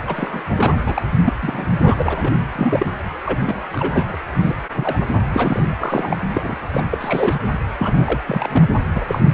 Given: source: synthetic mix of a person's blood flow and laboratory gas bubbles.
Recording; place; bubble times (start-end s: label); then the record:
Doppler ultrasound of blood flow; precordium
0.07-0.42 s: bubbles
0.49-0.81 s: bubbles
0.86-1.06 s: bubbles
1.24-1.32 s: bubbles
1.42-1.66 s: bubbles
1.80-1.95 s: bubbles
1.98-2.33 s: bubbles
2.55-2.87 s: bubbles
3.25-3.39 s: bubbles
3.44-4.17 s: bubbles
4.43-4.55 s: bubbles
4.69-5.06 s: bubbles
5.32-5.62 s: bubbles
5.69-6.17 s: bubbles
6.33-6.56 s: bubbles
6.73-6.82 s: bubbles
6.92-6.98 s: bubbles
7.00-7.35 s: bubbles
7.75-8.22 s: bubbles
8.27-8.66 s: bubbles
8.95-9.05 s: bubbles
9.08-9.20 s: bubbles
From the record:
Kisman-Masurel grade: 242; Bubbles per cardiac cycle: several, 3 to 8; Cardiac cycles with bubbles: 100%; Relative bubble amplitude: moderate (0.250 to 0.450); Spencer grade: 3 (all of the cardiac periods contain showers or single bubble signals, but not dominating or overriding the cardiac motion signals); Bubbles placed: anywhere in the cardiac cycle